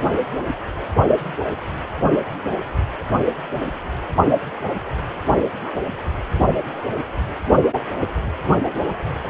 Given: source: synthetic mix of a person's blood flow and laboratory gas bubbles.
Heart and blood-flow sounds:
Doppler ultrasound of blood flow; precordium
no bubbles
From the record:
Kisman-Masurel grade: 000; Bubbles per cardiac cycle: 0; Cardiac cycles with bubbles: 0%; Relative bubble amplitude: no bubbles discernible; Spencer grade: 0 (complete lack of bubble signals)

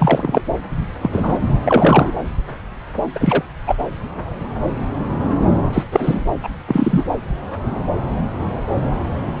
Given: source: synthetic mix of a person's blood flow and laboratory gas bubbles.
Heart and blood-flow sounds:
Doppler ultrasound of blood flow; subclavian vein
0.00-0.42 s: bubbles
1.02-1.39 s: bubbles
1.65-2.11 s: bubbles
3.15-3.43 s: bubbles
3.67-3.75 s: bubbles
5.72-5.83 s: bubbles
5.92-6.25 s: bubbles
6.43-6.49 s: bubbles
6.67-7.04 s: bubbles
From the record:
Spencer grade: 2 (many but less than half of the cardiac periods contain bubble signals, singularly or in groups); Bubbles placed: anywhere in the cardiac cycle

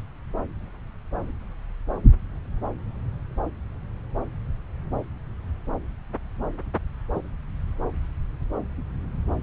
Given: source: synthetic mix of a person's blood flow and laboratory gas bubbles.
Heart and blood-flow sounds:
Doppler ultrasound of blood flow; subclavian vein
7.15-7.20 s: bubbles
From the record:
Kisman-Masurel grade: 112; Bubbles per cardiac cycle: 1 to 2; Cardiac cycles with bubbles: 1 to 10%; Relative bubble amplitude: moderate (0.250 to 0.450); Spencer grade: 1 (occasional bubble signal discernible with the cardiac motion signal, with majority of cardiac periods free of bubbles); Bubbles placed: anywhere in the cardiac cycle

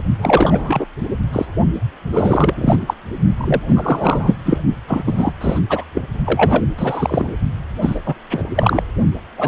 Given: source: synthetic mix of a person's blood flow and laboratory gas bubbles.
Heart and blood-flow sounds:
Doppler ultrasound of blood flow; precordium
0.18-0.86 s: bubbles
1.33-1.46 s: bubbles
2.12-2.77 s: bubbles
2.86-2.94 s: bubbles
3.37-3.60 s: bubbles
3.67-4.38 s: bubbles
4.45-4.58 s: bubbles
4.87-5.33 s: bubbles
5.41-5.59 s: bubbles
5.69-5.84 s: bubbles
5.94-6.08 s: bubbles
6.25-6.65 s: bubbles
6.77-7.35 s: bubbles
7.81-8.00 s: bubbles
8.05-8.14 s: bubbles
8.31-8.45 s: bubbles
8.55-8.83 s: bubbles
9.37-9.47 s: bubbles
From the record:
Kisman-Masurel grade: 343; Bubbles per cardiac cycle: rolling drumbeat, 9 or more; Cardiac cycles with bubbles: 100%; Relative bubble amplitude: loud (0.450 to 0.775); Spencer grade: 3 (all of the cardiac periods contain showers or single bubble signals, but not dominating or overriding the cardiac motion signals); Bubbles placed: only in the low amplitude regions of the cardiac cycle

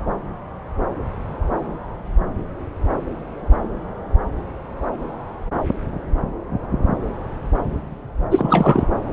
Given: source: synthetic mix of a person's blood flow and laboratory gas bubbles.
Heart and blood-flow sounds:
Doppler ultrasound of blood flow; subclavian vein
8.31-8.86 s: bubbles
From the record:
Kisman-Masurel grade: 213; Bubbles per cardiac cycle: several, 3 to 8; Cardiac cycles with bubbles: 1 to 10%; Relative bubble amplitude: loud (0.450 to 0.775); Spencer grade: 1 (occasional bubble signal discernible with the cardiac motion signal, with majority of cardiac periods free of bubbles); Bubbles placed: anywhere in the cardiac cycle

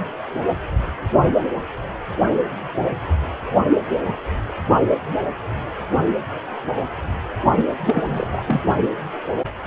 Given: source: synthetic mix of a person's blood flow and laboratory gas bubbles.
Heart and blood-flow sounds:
Doppler ultrasound of blood flow; precordium
7.56-7.64 s: bubbles
7.69-7.75 s: bubbles
7.86-8.42 s: bubbles
8.47-8.63 s: bubbles
From the record:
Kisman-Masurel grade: 212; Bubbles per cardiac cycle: several, 3 to 8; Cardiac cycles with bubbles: 1 to 10%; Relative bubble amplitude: moderate (0.250 to 0.450); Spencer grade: 1 (occasional bubble signal discernible with the cardiac motion signal, with majority of cardiac periods free of bubbles); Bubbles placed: only in the low amplitude regions of the cardiac cycle

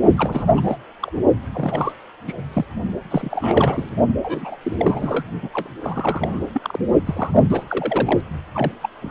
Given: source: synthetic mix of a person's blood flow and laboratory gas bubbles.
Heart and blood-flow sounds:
Doppler ultrasound of blood flow; precordium
0.17-0.77 s: bubbles
1.01-1.12 s: bubbles
1.53-1.93 s: bubbles
2.27-2.34 s: bubbles
2.54-2.65 s: bubbles
3.10-3.89 s: bubbles
4.22-4.56 s: bubbles
4.62-5.25 s: bubbles
5.42-5.50 s: bubbles
5.53-5.69 s: bubbles
5.82-6.46 s: bubbles
6.54-6.79 s: bubbles
7.06-7.44 s: bubbles
7.50-8.21 s: bubbles
8.54-8.72 s: bubbles
8.82-8.89 s: bubbles
9.00-9.10 s: bubbles
From the record:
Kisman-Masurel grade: 342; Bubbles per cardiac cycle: rolling drumbeat, 9 or more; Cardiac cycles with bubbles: 100%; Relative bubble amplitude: moderate (0.250 to 0.450); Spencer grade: 3 (all of the cardiac periods contain showers or single bubble signals, but not dominating or overriding the cardiac motion signals); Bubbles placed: only in the low amplitude regions of the cardiac cycle

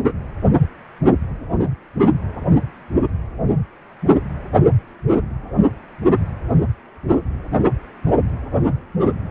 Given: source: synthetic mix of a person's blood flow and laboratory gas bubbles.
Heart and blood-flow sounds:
Doppler ultrasound of blood flow; precordium
no bubbles
From the record:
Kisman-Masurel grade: 000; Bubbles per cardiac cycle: 0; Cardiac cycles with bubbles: 0%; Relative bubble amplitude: no bubbles discernible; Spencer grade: 0 (complete lack of bubble signals)

